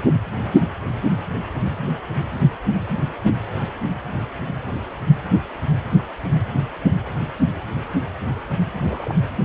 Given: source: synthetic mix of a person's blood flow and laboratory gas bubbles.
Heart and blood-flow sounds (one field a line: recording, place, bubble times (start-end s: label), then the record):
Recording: Doppler ultrasound of blood flow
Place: precordium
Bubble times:
8.76-9.16 s: bubbles
From the record:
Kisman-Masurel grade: 211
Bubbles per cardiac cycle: several, 3 to 8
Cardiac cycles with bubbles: 1 to 10%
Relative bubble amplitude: barely perceptible (0.100 to 0.250)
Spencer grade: 1 (occasional bubble signal discernible with the cardiac motion signal, with majority of cardiac periods free of bubbles)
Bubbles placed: anywhere in the cardiac cycle